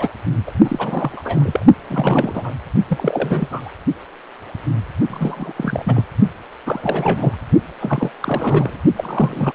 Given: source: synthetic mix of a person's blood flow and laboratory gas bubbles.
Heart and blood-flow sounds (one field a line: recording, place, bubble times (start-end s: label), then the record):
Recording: Doppler ultrasound of blood flow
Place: precordium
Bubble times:
0.00-0.10 s: bubbles
0.46-0.52 s: bubbles
0.64-1.66 s: bubbles
1.90-2.53 s: bubbles
2.88-3.71 s: bubbles
5.09-5.52 s: bubbles
5.56-6.03 s: bubbles
6.64-7.35 s: bubbles
7.80-8.11 s: bubbles
8.21-8.82 s: bubbles
8.96-9.53 s: bubbles
From the record:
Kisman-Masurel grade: 332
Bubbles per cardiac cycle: rolling drumbeat, 9 or more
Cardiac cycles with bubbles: 50 to 99%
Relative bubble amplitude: moderate (0.250 to 0.450)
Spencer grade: 3 (all of the cardiac periods contain showers or single bubble signals, but not dominating or overriding the cardiac motion signals)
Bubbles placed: only in the low amplitude regions of the cardiac cycle